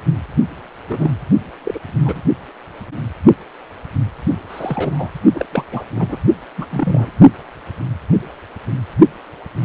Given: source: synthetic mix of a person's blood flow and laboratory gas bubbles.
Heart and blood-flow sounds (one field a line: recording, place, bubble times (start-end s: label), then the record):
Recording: Doppler ultrasound of blood flow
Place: precordium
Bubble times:
0.89-1.14 s: bubbles
1.64-1.79 s: bubbles
1.99-2.21 s: bubbles
4.49-5.12 s: bubbles
5.33-5.46 s: bubbles
5.53-5.63 s: bubbles
5.71-5.84 s: bubbles
5.95-6.19 s: bubbles
6.57-6.67 s: bubbles
6.71-7.12 s: bubbles
From the record:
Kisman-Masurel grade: 232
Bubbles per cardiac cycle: several, 3 to 8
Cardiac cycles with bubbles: 50 to 99%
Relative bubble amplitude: moderate (0.250 to 0.450)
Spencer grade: 3 (all of the cardiac periods contain showers or single bubble signals, but not dominating or overriding the cardiac motion signals)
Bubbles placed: only in the low amplitude regions of the cardiac cycle